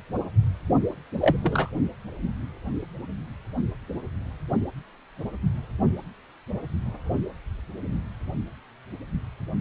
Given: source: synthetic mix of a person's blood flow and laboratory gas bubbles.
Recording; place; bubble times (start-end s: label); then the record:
Doppler ultrasound of blood flow; precordium
1.19-1.37 s: bubbles
1.42-1.69 s: bubbles
From the record:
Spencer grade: 1 (occasional bubble signal discernible with the cardiac motion signal, with majority of cardiac periods free of bubbles); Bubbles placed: only in the low amplitude regions of the cardiac cycle